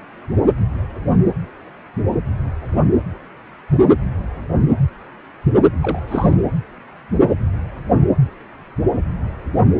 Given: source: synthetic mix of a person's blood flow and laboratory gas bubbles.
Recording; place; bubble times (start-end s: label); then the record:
Doppler ultrasound of blood flow; precordium
5.81-5.99 s: bubbles
6.07-6.33 s: bubbles
From the record:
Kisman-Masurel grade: 212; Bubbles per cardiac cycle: several, 3 to 8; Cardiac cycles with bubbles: 1 to 10%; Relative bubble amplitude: moderate (0.250 to 0.450); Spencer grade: 1 (occasional bubble signal discernible with the cardiac motion signal, with majority of cardiac periods free of bubbles); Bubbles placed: anywhere in the cardiac cycle